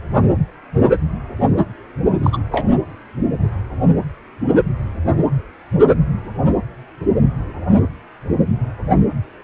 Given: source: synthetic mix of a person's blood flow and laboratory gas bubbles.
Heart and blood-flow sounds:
Doppler ultrasound of blood flow; precordium
2.23-2.38 s: bubbles
2.51-2.69 s: bubbles
From the record:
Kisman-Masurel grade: 213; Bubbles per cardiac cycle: several, 3 to 8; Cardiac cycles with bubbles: 1 to 10%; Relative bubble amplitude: loud (0.450 to 0.775); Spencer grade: 1 (occasional bubble signal discernible with the cardiac motion signal, with majority of cardiac periods free of bubbles); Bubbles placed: anywhere in the cardiac cycle

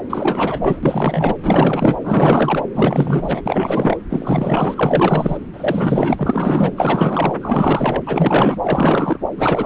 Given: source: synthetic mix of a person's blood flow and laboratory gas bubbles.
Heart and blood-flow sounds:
Doppler ultrasound of blood flow; subclavian vein
0.10-1.35 s: bubbles
1.42-2.00 s: bubbles
2.04-2.62 s: bubbles
2.75-3.42 s: bubbles
3.46-3.98 s: bubbles
4.09-5.38 s: bubbles
5.53-6.15 s: bubbles
6.17-6.73 s: bubbles
6.76-7.37 s: bubbles
7.40-8.02 s: bubbles
8.06-8.61 s: bubbles
8.63-9.18 s: bubbles
9.37-9.66 s: bubbles
From the record:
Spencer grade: 4 (maximum detectable bubble signal sounding continuously throughout systole and diastole of every cardiac period, and overriding the amplitude of the normal cardiac signals); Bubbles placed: anywhere in the cardiac cycle

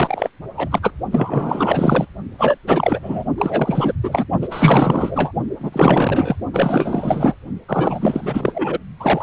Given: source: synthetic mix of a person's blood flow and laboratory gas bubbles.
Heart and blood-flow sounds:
Doppler ultrasound of blood flow; precordium
0.00-0.30 s: bubbles
0.56-0.80 s: bubbles
0.82-0.92 s: bubbles
1.11-2.06 s: bubbles
2.38-2.58 s: bubbles
2.67-3.24 s: bubbles
3.38-3.93 s: bubbles
4.03-4.25 s: bubbles
4.41-5.32 s: bubbles
5.59-6.36 s: bubbles
6.53-7.35 s: bubbles
7.68-8.79 s: bubbles
9.00-9.23 s: bubbles
From the record:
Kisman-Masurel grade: 444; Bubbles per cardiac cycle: continuous sound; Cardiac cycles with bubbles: 100%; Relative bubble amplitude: maximal (0.775 to 0.999); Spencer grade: 4 (maximum detectable bubble signal sounding continuously throughout systole and diastole of every cardiac period, and overriding the amplitude of the normal cardiac signals); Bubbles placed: only in the low amplitude regions of the cardiac cycle

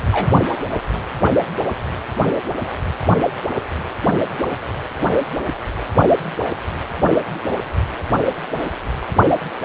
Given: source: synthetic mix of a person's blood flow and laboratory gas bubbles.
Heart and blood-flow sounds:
Doppler ultrasound of blood flow; precordium
0.00-0.03 s: bubbles
0.12-0.29 s: bubbles
From the record:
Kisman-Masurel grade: 112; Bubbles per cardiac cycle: 1 to 2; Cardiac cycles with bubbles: 1 to 10%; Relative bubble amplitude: moderate (0.250 to 0.450); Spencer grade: 1 (occasional bubble signal discernible with the cardiac motion signal, with majority of cardiac periods free of bubbles); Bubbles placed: only in the low amplitude regions of the cardiac cycle

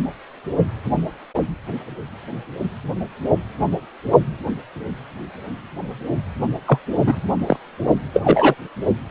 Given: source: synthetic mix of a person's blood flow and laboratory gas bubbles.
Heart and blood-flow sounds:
Doppler ultrasound of blood flow; precordium
6.67-6.79 s: bubbles
7.06-7.21 s: bubbles
7.46-7.57 s: bubbles
8.13-8.22 s: bubbles
8.24-8.54 s: bubbles
From the record:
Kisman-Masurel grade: 223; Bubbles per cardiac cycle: several, 3 to 8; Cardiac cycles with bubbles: 10 to 50%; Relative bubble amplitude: loud (0.450 to 0.775); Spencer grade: 2 (many but less than half of the cardiac periods contain bubble signals, singularly or in groups); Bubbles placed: only in the low amplitude regions of the cardiac cycle

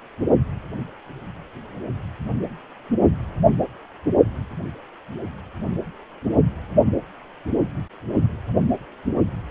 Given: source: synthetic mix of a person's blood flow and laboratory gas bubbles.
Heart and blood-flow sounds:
Doppler ultrasound of blood flow; precordium
9.47-9.51 s: bubbles
From the record:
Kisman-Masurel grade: 211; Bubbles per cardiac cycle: several, 3 to 8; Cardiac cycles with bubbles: 1 to 10%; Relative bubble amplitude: barely perceptible (0.100 to 0.250); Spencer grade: 1 (occasional bubble signal discernible with the cardiac motion signal, with majority of cardiac periods free of bubbles); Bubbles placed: only in the low amplitude regions of the cardiac cycle

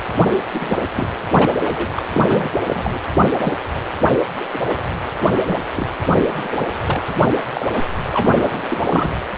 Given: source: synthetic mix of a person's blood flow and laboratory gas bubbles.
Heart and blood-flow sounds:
Doppler ultrasound of blood flow; precordium
0.00-0.06 s: bubbles
0.20-0.33 s: bubbles
0.53-0.77 s: bubbles
0.95-1.07 s: bubbles
1.32-1.56 s: bubbles
1.66-1.86 s: bubbles
1.96-2.03 s: bubbles
2.10-2.22 s: bubbles
2.27-2.53 s: bubbles
2.67-3.00 s: bubbles
3.43-3.56 s: bubbles
4.52-4.59 s: bubbles
4.69-4.81 s: bubbles
5.35-5.41 s: bubbles
5.47-5.58 s: bubbles
5.76-5.87 s: bubbles
6.17-6.57 s: bubbles
6.86-7.02 s: bubbles
7.06-7.21 s: bubbles
7.54-7.67 s: bubbles
8.12-8.33 s: bubbles
8.40-8.58 s: bubbles
8.70-9.16 s: bubbles
From the record:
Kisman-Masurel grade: 242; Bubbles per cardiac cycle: several, 3 to 8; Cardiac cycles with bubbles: 100%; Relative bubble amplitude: moderate (0.250 to 0.450); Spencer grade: 3 (all of the cardiac periods contain showers or single bubble signals, but not dominating or overriding the cardiac motion signals); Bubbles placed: anywhere in the cardiac cycle

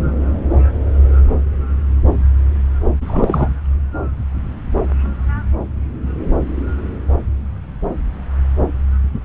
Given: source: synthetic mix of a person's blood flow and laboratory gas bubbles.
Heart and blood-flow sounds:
Doppler ultrasound of blood flow; subclavian vein
3.07-3.49 s: bubbles
From the record:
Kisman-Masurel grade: 213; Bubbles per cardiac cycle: several, 3 to 8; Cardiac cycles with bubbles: 1 to 10%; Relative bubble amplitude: loud (0.450 to 0.775); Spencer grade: 1 (occasional bubble signal discernible with the cardiac motion signal, with majority of cardiac periods free of bubbles); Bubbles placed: anywhere in the cardiac cycle

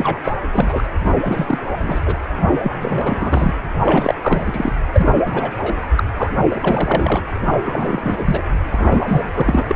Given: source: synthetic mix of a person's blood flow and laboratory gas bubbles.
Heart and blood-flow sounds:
Doppler ultrasound of blood flow; precordium
0.00-0.18 s: bubbles
0.23-0.32 s: bubbles
0.53-0.83 s: bubbles
0.95-0.97 s: bubbles
1.04-1.16 s: bubbles
1.24-1.58 s: bubbles
1.82-2.00 s: bubbles
2.05-2.15 s: bubbles
2.57-3.57 s: bubbles
3.84-4.15 s: bubbles
4.23-4.75 s: bubbles
4.94-5.21 s: bubbles
5.25-5.88 s: bubbles
5.96-6.04 s: bubbles
6.15-6.30 s: bubbles
6.49-7.24 s: bubbles
7.46-8.42 s: bubbles
8.69-9.23 s: bubbles
9.34-9.64 s: bubbles
9.67-9.76 s: bubbles
From the record:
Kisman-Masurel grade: 343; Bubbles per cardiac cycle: rolling drumbeat, 9 or more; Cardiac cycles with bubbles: 100%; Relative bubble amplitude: loud (0.450 to 0.775); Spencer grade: 3 (all of the cardiac periods contain showers or single bubble signals, but not dominating or overriding the cardiac motion signals); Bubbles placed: anywhere in the cardiac cycle

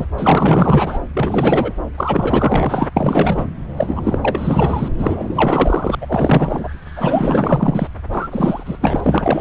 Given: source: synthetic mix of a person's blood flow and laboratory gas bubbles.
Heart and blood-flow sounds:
Doppler ultrasound of blood flow; subclavian vein
0.00-0.05 s: bubbles
0.17-0.99 s: bubbles
1.14-1.72 s: bubbles
1.97-2.88 s: bubbles
2.96-3.49 s: bubbles
3.77-4.18 s: bubbles
4.21-4.88 s: bubbles
4.98-5.95 s: bubbles
6.01-6.68 s: bubbles
6.96-7.87 s: bubbles
8.12-8.28 s: bubbles
8.32-8.79 s: bubbles
8.81-9.41 s: bubbles
From the record:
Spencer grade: 4 (maximum detectable bubble signal sounding continuously throughout systole and diastole of every cardiac period, and overriding the amplitude of the normal cardiac signals); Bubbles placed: anywhere in the cardiac cycle

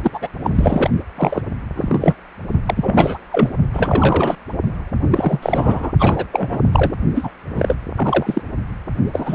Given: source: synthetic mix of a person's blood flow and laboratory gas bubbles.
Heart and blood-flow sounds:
Doppler ultrasound of blood flow; precordium
0.02-0.28 s: bubbles
0.43-0.50 s: bubbles
0.54-0.90 s: bubbles
1.16-1.42 s: bubbles
1.76-2.15 s: bubbles
2.66-3.18 s: bubbles
3.31-3.50 s: bubbles
3.73-4.35 s: bubbles
5.10-5.92 s: bubbles
5.99-6.26 s: bubbles
6.31-6.94 s: bubbles
7.15-7.31 s: bubbles
7.52-7.75 s: bubbles
7.96-8.42 s: bubbles
9.13-9.35 s: bubbles
From the record:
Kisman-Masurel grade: 333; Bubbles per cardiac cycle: rolling drumbeat, 9 or more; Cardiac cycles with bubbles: 50 to 99%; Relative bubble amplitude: loud (0.450 to 0.775); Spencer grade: 3 (all of the cardiac periods contain showers or single bubble signals, but not dominating or overriding the cardiac motion signals); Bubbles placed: only in the low amplitude regions of the cardiac cycle

